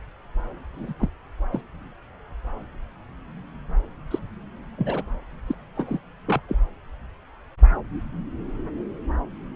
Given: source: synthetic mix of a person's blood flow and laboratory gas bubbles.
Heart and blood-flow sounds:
Doppler ultrasound of blood flow; subclavian vein
0.77-0.93 s: bubbles
0.99-1.09 s: bubbles
1.51-1.61 s: bubbles
4.11-4.19 s: bubbles
4.78-5.04 s: bubbles
5.47-5.55 s: bubbles
5.76-6.00 s: bubbles
6.26-6.41 s: bubbles
6.48-6.56 s: bubbles
From the record:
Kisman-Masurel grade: 232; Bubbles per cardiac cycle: several, 3 to 8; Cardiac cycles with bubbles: 50 to 99%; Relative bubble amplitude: moderate (0.250 to 0.450); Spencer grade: 3 (all of the cardiac periods contain showers or single bubble signals, but not dominating or overriding the cardiac motion signals); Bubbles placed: anywhere in the cardiac cycle

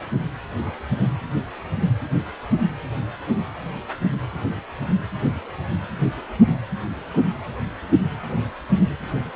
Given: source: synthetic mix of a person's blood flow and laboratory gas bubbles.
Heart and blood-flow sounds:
Doppler ultrasound of blood flow; precordium
no bubbles
From the record:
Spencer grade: 0 (complete lack of bubble signals)

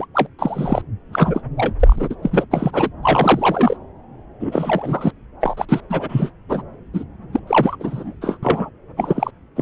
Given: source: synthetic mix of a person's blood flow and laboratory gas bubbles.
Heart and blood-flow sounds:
Doppler ultrasound of blood flow; subclavian vein
0.00-0.06 s: bubbles
0.14-0.29 s: bubbles
0.39-0.82 s: bubbles
1.12-1.41 s: bubbles
1.57-1.73 s: bubbles
1.79-2.15 s: bubbles
2.22-2.45 s: bubbles
2.51-2.90 s: bubbles
3.03-3.77 s: bubbles
4.40-5.12 s: bubbles
5.41-5.66 s: bubbles
5.69-5.81 s: bubbles
5.90-6.30 s: bubbles
6.49-6.62 s: bubbles
6.94-7.04 s: bubbles
7.33-7.40 s: bubbles
7.47-7.77 s: bubbles
7.79-8.14 s: bubbles
8.21-8.37 s: bubbles
8.43-8.70 s: bubbles
8.96-9.31 s: bubbles
9.56-9.62 s: bubbles
From the record:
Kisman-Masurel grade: 343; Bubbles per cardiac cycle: rolling drumbeat, 9 or more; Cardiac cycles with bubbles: 100%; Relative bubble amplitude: loud (0.450 to 0.775); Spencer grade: 3 (all of the cardiac periods contain showers or single bubble signals, but not dominating or overriding the cardiac motion signals); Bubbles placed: anywhere in the cardiac cycle

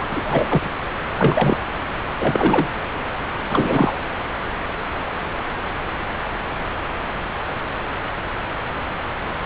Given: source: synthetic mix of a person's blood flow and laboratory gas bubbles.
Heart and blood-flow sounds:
Doppler ultrasound of blood flow; subclavian vein
0.00-0.06 s: bubbles
0.12-0.69 s: bubbles
1.13-1.63 s: bubbles
2.19-2.68 s: bubbles
3.49-3.96 s: bubbles
From the record:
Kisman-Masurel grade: 223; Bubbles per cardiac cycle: several, 3 to 8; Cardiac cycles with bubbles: 10 to 50%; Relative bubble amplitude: loud (0.450 to 0.775); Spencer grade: 2 (many but less than half of the cardiac periods contain bubble signals, singularly or in groups); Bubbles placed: anywhere in the cardiac cycle

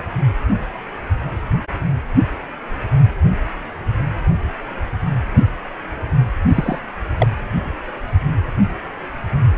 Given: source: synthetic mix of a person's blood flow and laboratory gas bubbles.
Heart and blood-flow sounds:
Doppler ultrasound of blood flow; precordium
6.54-6.79 s: bubbles
7.18-7.28 s: bubbles
From the record:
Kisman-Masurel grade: 113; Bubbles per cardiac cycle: 1 to 2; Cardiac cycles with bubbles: 1 to 10%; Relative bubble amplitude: loud (0.450 to 0.775); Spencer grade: 1 (occasional bubble signal discernible with the cardiac motion signal, with majority of cardiac periods free of bubbles); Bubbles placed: anywhere in the cardiac cycle

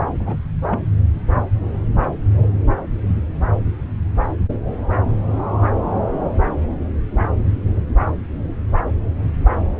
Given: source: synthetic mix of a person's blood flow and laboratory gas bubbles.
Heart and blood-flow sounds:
Doppler ultrasound of blood flow; subclavian vein
0.19-0.37 s: bubbles
0.70-0.79 s: bubbles
From the record:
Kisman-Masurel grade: 112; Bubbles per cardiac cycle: 1 to 2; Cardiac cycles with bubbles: 1 to 10%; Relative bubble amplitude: moderate (0.250 to 0.450); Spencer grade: 1 (occasional bubble signal discernible with the cardiac motion signal, with majority of cardiac periods free of bubbles); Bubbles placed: anywhere in the cardiac cycle

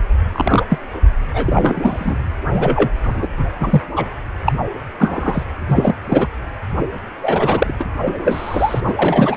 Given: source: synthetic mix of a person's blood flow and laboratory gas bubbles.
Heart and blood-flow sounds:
Doppler ultrasound of blood flow; precordium
0.33-0.63 s: bubbles
0.69-0.78 s: bubbles
1.33-2.17 s: bubbles
2.53-2.91 s: bubbles
3.04-3.28 s: bubbles
3.60-3.82 s: bubbles
3.96-4.04 s: bubbles
4.46-4.53 s: bubbles
4.98-5.44 s: bubbles
5.67-5.94 s: bubbles
6.10-6.29 s: bubbles
7.22-7.73 s: bubbles
7.80-7.85 s: bubbles
8.05-8.80 s: bubbles
8.85-8.94 s: bubbles
8.96-9.36 s: bubbles
From the record:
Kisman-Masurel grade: 243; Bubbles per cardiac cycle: several, 3 to 8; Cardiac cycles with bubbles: 100%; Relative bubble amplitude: loud (0.450 to 0.775); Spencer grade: 3 (all of the cardiac periods contain showers or single bubble signals, but not dominating or overriding the cardiac motion signals); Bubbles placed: anywhere in the cardiac cycle

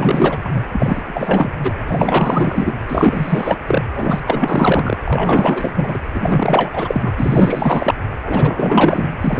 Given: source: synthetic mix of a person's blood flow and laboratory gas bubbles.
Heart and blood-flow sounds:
Doppler ultrasound of blood flow; precordium
0.00-0.61 s: bubbles
0.71-1.50 s: bubbles
1.64-1.76 s: bubbles
1.87-2.74 s: bubbles
2.89-3.57 s: bubbles
3.67-3.85 s: bubbles
3.94-4.20 s: bubbles
4.26-4.98 s: bubbles
5.05-5.98 s: bubbles
6.13-6.71 s: bubbles
6.73-7.13 s: bubbles
7.16-7.95 s: bubbles
8.24-9.08 s: bubbles
9.21-9.40 s: bubbles
From the record:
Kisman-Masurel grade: 444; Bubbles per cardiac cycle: continuous sound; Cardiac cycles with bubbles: 100%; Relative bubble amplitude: maximal (0.775 to 0.999); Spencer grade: 4 (maximum detectable bubble signal sounding continuously throughout systole and diastole of every cardiac period, and overriding the amplitude of the normal cardiac signals); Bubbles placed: anywhere in the cardiac cycle

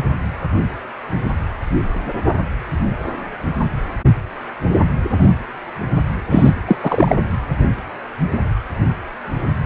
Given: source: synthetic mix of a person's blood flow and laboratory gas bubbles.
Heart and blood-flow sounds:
Doppler ultrasound of blood flow; precordium
6.29-6.54 s: bubbles
6.67-6.76 s: bubbles
6.83-7.15 s: bubbles
From the record:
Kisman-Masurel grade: 223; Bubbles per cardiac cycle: several, 3 to 8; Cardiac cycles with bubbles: 10 to 50%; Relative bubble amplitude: loud (0.450 to 0.775); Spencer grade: 2 (many but less than half of the cardiac periods contain bubble signals, singularly or in groups); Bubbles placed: anywhere in the cardiac cycle

